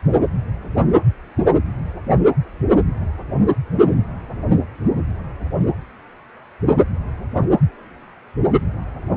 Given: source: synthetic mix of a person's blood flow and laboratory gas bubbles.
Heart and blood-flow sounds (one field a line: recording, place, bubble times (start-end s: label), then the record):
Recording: Doppler ultrasound of blood flow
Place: precordium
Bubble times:
no bubbles
From the record:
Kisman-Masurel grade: 000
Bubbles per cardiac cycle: 0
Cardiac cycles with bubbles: 0%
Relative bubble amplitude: no bubbles discernible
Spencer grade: 0 (complete lack of bubble signals)